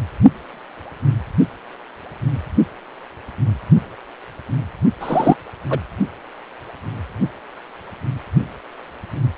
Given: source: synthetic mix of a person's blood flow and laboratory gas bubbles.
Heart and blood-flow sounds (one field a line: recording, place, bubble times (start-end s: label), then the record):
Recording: Doppler ultrasound of blood flow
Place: precordium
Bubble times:
5.00-5.36 s: bubbles
5.69-5.80 s: bubbles
From the record:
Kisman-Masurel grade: 213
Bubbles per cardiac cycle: several, 3 to 8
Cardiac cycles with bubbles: 1 to 10%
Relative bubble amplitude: loud (0.450 to 0.775)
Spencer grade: 1 (occasional bubble signal discernible with the cardiac motion signal, with majority of cardiac periods free of bubbles)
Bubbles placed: only in the low amplitude regions of the cardiac cycle